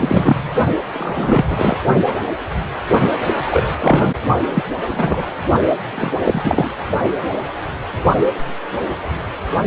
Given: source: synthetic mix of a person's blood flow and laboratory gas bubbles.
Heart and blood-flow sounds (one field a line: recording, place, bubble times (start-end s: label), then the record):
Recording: Doppler ultrasound of blood flow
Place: precordium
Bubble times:
0.00-0.50 s: bubbles
0.94-1.77 s: bubbles
3.26-3.62 s: bubbles
3.80-4.07 s: bubbles
4.53-4.64 s: bubbles
4.91-5.28 s: bubbles
5.95-6.11 s: bubbles
6.24-6.74 s: bubbles
From the record:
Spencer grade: 3 (all of the cardiac periods contain showers or single bubble signals, but not dominating or overriding the cardiac motion signals)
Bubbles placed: only in the low amplitude regions of the cardiac cycle